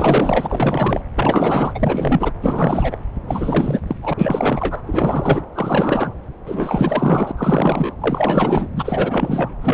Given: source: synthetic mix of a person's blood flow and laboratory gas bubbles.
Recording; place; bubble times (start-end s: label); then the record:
Doppler ultrasound of blood flow; subclavian vein
0.00-1.03 s: bubbles
1.16-2.31 s: bubbles
2.42-2.99 s: bubbles
3.27-3.80 s: bubbles
3.87-3.96 s: bubbles
4.01-4.13 s: bubbles
4.17-4.82 s: bubbles
4.87-5.44 s: bubbles
5.54-6.14 s: bubbles
6.46-7.32 s: bubbles
7.37-7.95 s: bubbles
8.00-8.67 s: bubbles
8.76-9.51 s: bubbles
9.62-9.74 s: bubbles
From the record:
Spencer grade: 4 (maximum detectable bubble signal sounding continuously throughout systole and diastole of every cardiac period, and overriding the amplitude of the normal cardiac signals); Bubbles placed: anywhere in the cardiac cycle